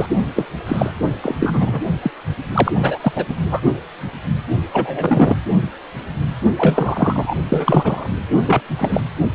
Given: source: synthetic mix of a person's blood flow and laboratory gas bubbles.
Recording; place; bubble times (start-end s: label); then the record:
Doppler ultrasound of blood flow; precordium
0.00-0.07 s: bubbles
0.36-0.46 s: bubbles
0.67-0.94 s: bubbles
1.22-1.37 s: bubbles
1.40-1.88 s: bubbles
2.02-2.11 s: bubbles
2.54-2.72 s: bubbles
2.79-2.98 s: bubbles
3.02-3.12 s: bubbles
3.15-3.26 s: bubbles
3.29-3.35 s: bubbles
3.51-3.60 s: bubbles
4.73-5.36 s: bubbles
6.57-7.35 s: bubbles
7.49-8.09 s: bubbles
8.46-8.62 s: bubbles
8.76-9.00 s: bubbles
From the record:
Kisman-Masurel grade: 233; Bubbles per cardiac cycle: several, 3 to 8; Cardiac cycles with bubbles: 50 to 99%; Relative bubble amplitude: loud (0.450 to 0.775); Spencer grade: 3 (all of the cardiac periods contain showers or single bubble signals, but not dominating or overriding the cardiac motion signals); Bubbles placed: only in the low amplitude regions of the cardiac cycle